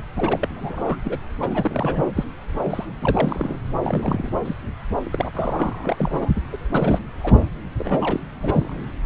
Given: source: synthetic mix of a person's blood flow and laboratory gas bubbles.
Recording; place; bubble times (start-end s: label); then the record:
Doppler ultrasound of blood flow; subclavian vein
0.16-0.49 s: bubbles
0.56-0.97 s: bubbles
1.04-1.18 s: bubbles
1.41-2.12 s: bubbles
2.16-2.24 s: bubbles
2.64-2.85 s: bubbles
3.01-3.58 s: bubbles
3.83-4.29 s: bubbles
4.44-4.56 s: bubbles
4.96-5.30 s: bubbles
5.34-6.29 s: bubbles
6.52-6.57 s: bubbles
6.75-6.98 s: bubbles
7.20-7.47 s: bubbles
7.78-8.20 s: bubbles
8.43-8.85 s: bubbles
From the record:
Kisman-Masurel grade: 342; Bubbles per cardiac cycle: rolling drumbeat, 9 or more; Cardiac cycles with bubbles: 100%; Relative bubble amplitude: moderate (0.250 to 0.450); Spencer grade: 3 (all of the cardiac periods contain showers or single bubble signals, but not dominating or overriding the cardiac motion signals); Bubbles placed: anywhere in the cardiac cycle